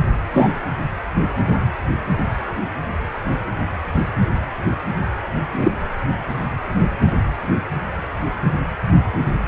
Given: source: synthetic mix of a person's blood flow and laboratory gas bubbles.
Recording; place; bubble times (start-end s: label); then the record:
Doppler ultrasound of blood flow; precordium
0.33-0.52 s: bubbles
5.54-5.71 s: bubbles
From the record:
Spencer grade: 2 (many but less than half of the cardiac periods contain bubble signals, singularly or in groups); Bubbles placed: anywhere in the cardiac cycle